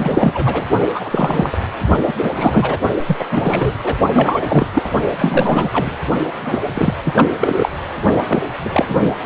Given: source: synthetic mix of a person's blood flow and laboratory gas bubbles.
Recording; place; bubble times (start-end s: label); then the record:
Doppler ultrasound of blood flow; precordium
0.00-0.66 s: bubbles
0.94-1.58 s: bubbles
2.07-2.13 s: bubbles
2.22-2.79 s: bubbles
3.07-3.17 s: bubbles
3.19-3.27 s: bubbles
3.32-3.75 s: bubbles
3.83-3.96 s: bubbles
4.13-4.67 s: bubbles
4.74-4.89 s: bubbles
5.20-5.98 s: bubbles
6.42-6.62 s: bubbles
6.74-6.94 s: bubbles
7.04-7.29 s: bubbles
7.40-7.69 s: bubbles
8.27-8.42 s: bubbles
8.59-9.16 s: bubbles
9.21-9.26 s: bubbles
From the record:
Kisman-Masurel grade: 333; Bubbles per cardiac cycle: rolling drumbeat, 9 or more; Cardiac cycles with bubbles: 50 to 99%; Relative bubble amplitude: loud (0.450 to 0.775); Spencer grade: 3 (all of the cardiac periods contain showers or single bubble signals, but not dominating or overriding the cardiac motion signals); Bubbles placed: only in the low amplitude regions of the cardiac cycle